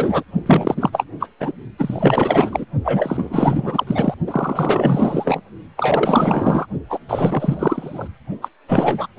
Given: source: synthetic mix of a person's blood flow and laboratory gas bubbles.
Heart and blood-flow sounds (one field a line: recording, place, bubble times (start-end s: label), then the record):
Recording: Doppler ultrasound of blood flow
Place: precordium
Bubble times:
0.00-0.23 s: bubbles
0.46-0.90 s: bubbles
0.92-1.05 s: bubbles
1.19-1.28 s: bubbles
1.40-1.52 s: bubbles
1.78-2.66 s: bubbles
2.83-3.84 s: bubbles
3.87-4.14 s: bubbles
4.27-5.42 s: bubbles
5.77-6.66 s: bubbles
6.90-6.99 s: bubbles
7.08-8.07 s: bubbles
8.42-8.48 s: bubbles
8.68-9.07 s: bubbles
From the record:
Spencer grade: 4 (maximum detectable bubble signal sounding continuously throughout systole and diastole of every cardiac period, and overriding the amplitude of the normal cardiac signals)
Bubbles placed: only in the low amplitude regions of the cardiac cycle